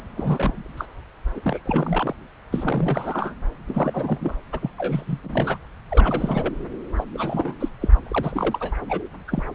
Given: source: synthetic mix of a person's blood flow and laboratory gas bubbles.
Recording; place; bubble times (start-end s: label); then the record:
Doppler ultrasound of blood flow; subclavian vein
0.17-0.73 s: bubbles
0.77-0.85 s: bubbles
1.35-1.41 s: bubbles
1.44-1.59 s: bubbles
1.66-2.15 s: bubbles
2.52-3.35 s: bubbles
3.67-4.34 s: bubbles
4.52-4.71 s: bubbles
4.78-5.20 s: bubbles
5.24-5.57 s: bubbles
5.91-6.54 s: bubbles
6.96-7.04 s: bubbles
7.14-7.54 s: bubbles
7.59-7.69 s: bubbles
7.81-7.88 s: bubbles
8.06-8.72 s: bubbles
8.88-9.03 s: bubbles
9.28-9.43 s: bubbles
From the record:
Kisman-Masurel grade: 342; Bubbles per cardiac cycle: rolling drumbeat, 9 or more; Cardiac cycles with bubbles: 100%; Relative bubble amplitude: moderate (0.250 to 0.450); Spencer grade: 3 (all of the cardiac periods contain showers or single bubble signals, but not dominating or overriding the cardiac motion signals); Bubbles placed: anywhere in the cardiac cycle